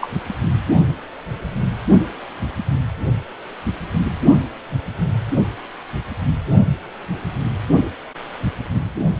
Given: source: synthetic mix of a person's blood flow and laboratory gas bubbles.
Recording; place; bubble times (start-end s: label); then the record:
Doppler ultrasound of blood flow; precordium
0.01-0.09 s: bubbles
From the record:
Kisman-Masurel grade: 122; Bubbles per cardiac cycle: 1 to 2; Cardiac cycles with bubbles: 10 to 50%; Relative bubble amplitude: moderate (0.250 to 0.450); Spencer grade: 2 (many but less than half of the cardiac periods contain bubble signals, singularly or in groups); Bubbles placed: only in the low amplitude regions of the cardiac cycle